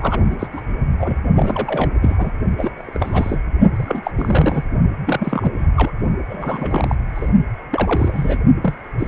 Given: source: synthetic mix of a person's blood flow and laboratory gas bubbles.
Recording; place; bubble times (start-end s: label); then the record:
Doppler ultrasound of blood flow; precordium
0.00-0.19 s: bubbles
0.30-0.48 s: bubbles
0.52-0.61 s: bubbles
0.99-1.18 s: bubbles
1.34-1.92 s: bubbles
2.01-2.31 s: bubbles
2.57-2.71 s: bubbles
2.78-3.40 s: bubbles
3.75-4.11 s: bubbles
4.17-4.62 s: bubbles
5.05-5.50 s: bubbles
5.58-5.67 s: bubbles
5.76-5.91 s: bubbles
6.29-6.96 s: bubbles
7.15-7.29 s: bubbles
7.71-8.39 s: bubbles
8.62-8.75 s: bubbles
8.99-9.08 s: bubbles
From the record:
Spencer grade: 3 (all of the cardiac periods contain showers or single bubble signals, but not dominating or overriding the cardiac motion signals); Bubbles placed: only in the low amplitude regions of the cardiac cycle